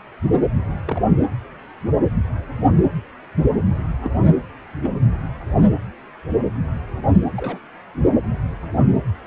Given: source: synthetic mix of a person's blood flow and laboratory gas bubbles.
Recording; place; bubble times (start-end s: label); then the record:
Doppler ultrasound of blood flow; precordium
0.85-1.10 s: bubbles
4.04-4.10 s: bubbles
4.83-4.90 s: bubbles
7.37-7.58 s: bubbles
From the record:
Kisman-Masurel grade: 121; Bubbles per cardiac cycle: 1 to 2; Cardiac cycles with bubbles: 10 to 50%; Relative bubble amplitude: barely perceptible (0.100 to 0.250); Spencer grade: 2 (many but less than half of the cardiac periods contain bubble signals, singularly or in groups); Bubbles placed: anywhere in the cardiac cycle